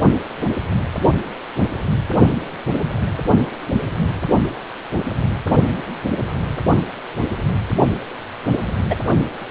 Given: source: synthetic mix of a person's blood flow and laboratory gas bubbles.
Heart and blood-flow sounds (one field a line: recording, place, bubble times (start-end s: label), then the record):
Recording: Doppler ultrasound of blood flow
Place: precordium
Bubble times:
8.90-8.95 s: bubbles
From the record:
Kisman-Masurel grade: 123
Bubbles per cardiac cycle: 1 to 2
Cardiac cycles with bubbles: 10 to 50%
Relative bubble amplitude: loud (0.450 to 0.775)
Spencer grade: 2 (many but less than half of the cardiac periods contain bubble signals, singularly or in groups)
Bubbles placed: only in the low amplitude regions of the cardiac cycle